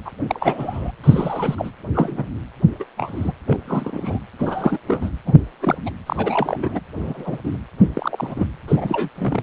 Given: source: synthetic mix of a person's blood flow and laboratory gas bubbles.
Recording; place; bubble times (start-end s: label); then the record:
Doppler ultrasound of blood flow; precordium
0.05-0.11 s: bubbles
0.27-0.92 s: bubbles
1.04-1.70 s: bubbles
1.94-2.28 s: bubbles
2.79-2.84 s: bubbles
2.97-3.32 s: bubbles
3.46-3.58 s: bubbles
3.67-4.19 s: bubbles
4.38-4.80 s: bubbles
4.87-5.09 s: bubbles
5.26-5.34 s: bubbles
5.60-5.77 s: bubbles
5.85-5.90 s: bubbles
6.06-6.80 s: bubbles
6.96-7.39 s: bubbles
7.43-7.61 s: bubbles
7.79-7.91 s: bubbles
7.95-8.46 s: bubbles
8.68-9.09 s: bubbles
9.18-9.43 s: bubbles
From the record:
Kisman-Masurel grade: 242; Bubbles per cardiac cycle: several, 3 to 8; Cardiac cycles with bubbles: 100%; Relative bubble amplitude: moderate (0.250 to 0.450); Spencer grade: 3 (all of the cardiac periods contain showers or single bubble signals, but not dominating or overriding the cardiac motion signals); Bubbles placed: anywhere in the cardiac cycle